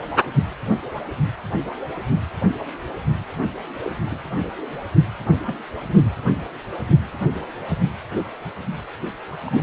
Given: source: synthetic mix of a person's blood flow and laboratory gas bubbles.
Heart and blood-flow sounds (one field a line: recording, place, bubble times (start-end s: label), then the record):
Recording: Doppler ultrasound of blood flow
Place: precordium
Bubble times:
3.83-3.89 s: bubbles
4.04-4.17 s: bubbles
5.46-5.55 s: bubbles
9.46-9.63 s: bubbles
From the record:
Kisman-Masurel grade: 121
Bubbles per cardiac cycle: 1 to 2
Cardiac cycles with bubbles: 10 to 50%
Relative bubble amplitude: barely perceptible (0.100 to 0.250)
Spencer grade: 2 (many but less than half of the cardiac periods contain bubble signals, singularly or in groups)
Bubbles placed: anywhere in the cardiac cycle